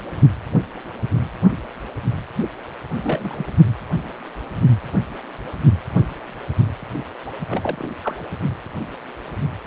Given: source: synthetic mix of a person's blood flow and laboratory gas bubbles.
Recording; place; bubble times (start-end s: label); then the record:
Doppler ultrasound of blood flow; precordium
3.04-3.45 s: bubbles
7.25-7.30 s: bubbles
7.47-7.88 s: bubbles
8.04-8.15 s: bubbles
From the record:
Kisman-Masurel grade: 221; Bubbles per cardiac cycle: several, 3 to 8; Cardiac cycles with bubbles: 10 to 50%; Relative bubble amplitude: barely perceptible (0.100 to 0.250); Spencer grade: 2 (many but less than half of the cardiac periods contain bubble signals, singularly or in groups); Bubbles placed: only in the low amplitude regions of the cardiac cycle